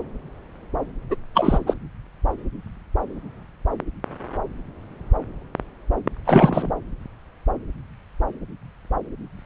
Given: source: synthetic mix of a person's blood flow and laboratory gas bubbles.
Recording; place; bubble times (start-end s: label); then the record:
Doppler ultrasound of blood flow; subclavian vein
1.09-1.16 s: bubbles
1.34-1.59 s: bubbles
1.66-1.74 s: bubbles
6.25-6.71 s: bubbles
From the record:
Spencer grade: 1 (occasional bubble signal discernible with the cardiac motion signal, with majority of cardiac periods free of bubbles); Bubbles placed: anywhere in the cardiac cycle